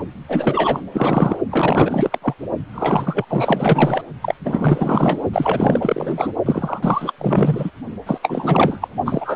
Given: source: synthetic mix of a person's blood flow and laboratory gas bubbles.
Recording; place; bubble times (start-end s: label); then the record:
Doppler ultrasound of blood flow; precordium
0.28-0.81 s: bubbles
0.92-1.38 s: bubbles
1.50-2.19 s: bubbles
2.22-2.34 s: bubbles
2.73-3.25 s: bubbles
3.29-4.01 s: bubbles
4.22-4.34 s: bubbles
4.45-5.24 s: bubbles
5.33-6.32 s: bubbles
6.46-7.13 s: bubbles
7.18-7.71 s: bubbles
8.05-8.19 s: bubbles
8.22-8.88 s: bubbles
9.05-9.36 s: bubbles
From the record:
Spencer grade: 4 (maximum detectable bubble signal sounding continuously throughout systole and diastole of every cardiac period, and overriding the amplitude of the normal cardiac signals); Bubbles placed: only in the low amplitude regions of the cardiac cycle